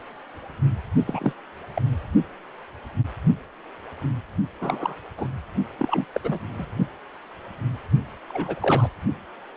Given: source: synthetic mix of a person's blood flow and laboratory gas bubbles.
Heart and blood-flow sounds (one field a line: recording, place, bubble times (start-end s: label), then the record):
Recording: Doppler ultrasound of blood flow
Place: precordium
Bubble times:
1.06-1.33 s: bubbles
1.76-1.82 s: bubbles
4.61-4.95 s: bubbles
5.17-5.28 s: bubbles
5.79-6.05 s: bubbles
6.12-6.21 s: bubbles
6.24-6.38 s: bubbles
6.58-6.66 s: bubbles
8.29-8.88 s: bubbles
From the record:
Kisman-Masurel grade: 232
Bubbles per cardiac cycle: several, 3 to 8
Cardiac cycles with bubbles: 50 to 99%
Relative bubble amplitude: moderate (0.250 to 0.450)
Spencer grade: 3 (all of the cardiac periods contain showers or single bubble signals, but not dominating or overriding the cardiac motion signals)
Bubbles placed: only in the low amplitude regions of the cardiac cycle